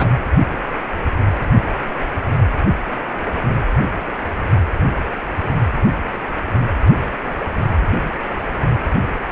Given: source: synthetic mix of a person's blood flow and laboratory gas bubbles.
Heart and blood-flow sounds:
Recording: Doppler ultrasound of blood flow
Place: precordium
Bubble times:
0.00-0.09 s: bubbles
From the record:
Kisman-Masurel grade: 222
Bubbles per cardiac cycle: several, 3 to 8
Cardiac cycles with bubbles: 10 to 50%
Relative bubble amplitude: moderate (0.250 to 0.450)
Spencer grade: 2 (many but less than half of the cardiac periods contain bubble signals, singularly or in groups)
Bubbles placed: anywhere in the cardiac cycle

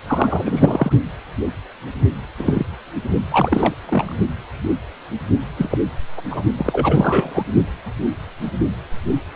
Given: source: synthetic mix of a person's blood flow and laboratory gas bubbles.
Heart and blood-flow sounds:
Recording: Doppler ultrasound of blood flow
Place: precordium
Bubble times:
0.07-0.92 s: bubbles
2.39-2.67 s: bubbles
3.31-3.76 s: bubbles
3.87-4.15 s: bubbles
5.57-5.77 s: bubbles
6.17-6.21 s: bubbles
6.30-6.43 s: bubbles
6.57-7.44 s: bubbles
From the record:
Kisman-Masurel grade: 232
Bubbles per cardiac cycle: several, 3 to 8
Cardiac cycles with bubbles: 50 to 99%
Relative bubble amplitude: moderate (0.250 to 0.450)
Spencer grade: 3 (all of the cardiac periods contain showers or single bubble signals, but not dominating or overriding the cardiac motion signals)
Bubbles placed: only in the low amplitude regions of the cardiac cycle

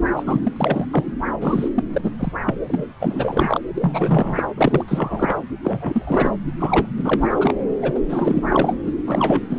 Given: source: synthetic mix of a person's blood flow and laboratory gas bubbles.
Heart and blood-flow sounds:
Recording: Doppler ultrasound of blood flow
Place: subclavian vein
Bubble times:
0.16-0.40 s: bubbles
0.43-0.53 s: bubbles
0.56-0.86 s: bubbles
0.90-1.14 s: bubbles
1.40-1.68 s: bubbles
1.75-1.83 s: bubbles
1.93-2.12 s: bubbles
2.19-2.32 s: bubbles
2.46-2.54 s: bubbles
2.67-2.84 s: bubbles
3.00-3.59 s: bubbles
3.75-4.53 s: bubbles
4.58-4.84 s: bubbles
4.88-5.41 s: bubbles
5.64-6.30 s: bubbles
6.59-6.88 s: bubbles
6.96-7.34 s: bubbles
7.39-7.54 s: bubbles
7.82-8.00 s: bubbles
8.09-8.43 s: bubbles
8.46-8.76 s: bubbles
8.86-8.92 s: bubbles
9.07-9.40 s: bubbles
9.50-9.59 s: bubbles
From the record:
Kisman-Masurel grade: 343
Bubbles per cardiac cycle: rolling drumbeat, 9 or more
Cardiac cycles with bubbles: 100%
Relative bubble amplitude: loud (0.450 to 0.775)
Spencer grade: 3 (all of the cardiac periods contain showers or single bubble signals, but not dominating or overriding the cardiac motion signals)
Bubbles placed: anywhere in the cardiac cycle

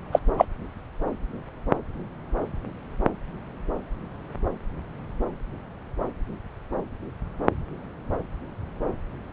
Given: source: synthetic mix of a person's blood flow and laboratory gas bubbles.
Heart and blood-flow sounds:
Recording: Doppler ultrasound of blood flow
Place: subclavian vein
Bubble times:
0.12-0.19 s: bubbles
0.37-0.46 s: bubbles
From the record:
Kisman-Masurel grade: 113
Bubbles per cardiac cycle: 1 to 2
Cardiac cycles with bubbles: 1 to 10%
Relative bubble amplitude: loud (0.450 to 0.775)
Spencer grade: 1 (occasional bubble signal discernible with the cardiac motion signal, with majority of cardiac periods free of bubbles)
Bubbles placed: anywhere in the cardiac cycle

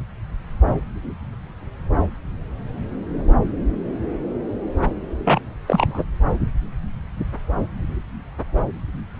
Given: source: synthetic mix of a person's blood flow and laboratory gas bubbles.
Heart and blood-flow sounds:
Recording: Doppler ultrasound of blood flow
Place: subclavian vein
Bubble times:
5.25-5.40 s: bubbles
5.67-6.04 s: bubbles
From the record:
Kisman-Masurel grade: 223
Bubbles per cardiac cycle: several, 3 to 8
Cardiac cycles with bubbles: 10 to 50%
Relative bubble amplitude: loud (0.450 to 0.775)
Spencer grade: 2 (many but less than half of the cardiac periods contain bubble signals, singularly or in groups)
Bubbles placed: anywhere in the cardiac cycle

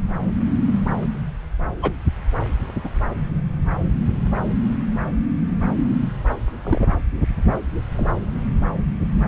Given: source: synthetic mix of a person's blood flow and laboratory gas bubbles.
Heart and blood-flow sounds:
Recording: Doppler ultrasound of blood flow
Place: subclavian vein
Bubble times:
1.82-1.92 s: bubbles
2.84-2.89 s: bubbles
6.63-6.86 s: bubbles
7.96-8.06 s: bubbles
From the record:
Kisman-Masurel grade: 122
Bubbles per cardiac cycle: 1 to 2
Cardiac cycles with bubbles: 10 to 50%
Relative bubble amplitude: moderate (0.250 to 0.450)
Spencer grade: 2 (many but less than half of the cardiac periods contain bubble signals, singularly or in groups)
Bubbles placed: anywhere in the cardiac cycle

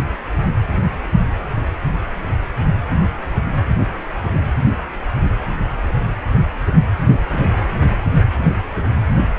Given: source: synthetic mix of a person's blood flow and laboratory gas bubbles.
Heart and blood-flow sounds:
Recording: Doppler ultrasound of blood flow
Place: precordium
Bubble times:
7.07-7.18 s: bubbles
7.33-7.58 s: bubbles
From the record:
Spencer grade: 1 (occasional bubble signal discernible with the cardiac motion signal, with majority of cardiac periods free of bubbles)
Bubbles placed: anywhere in the cardiac cycle

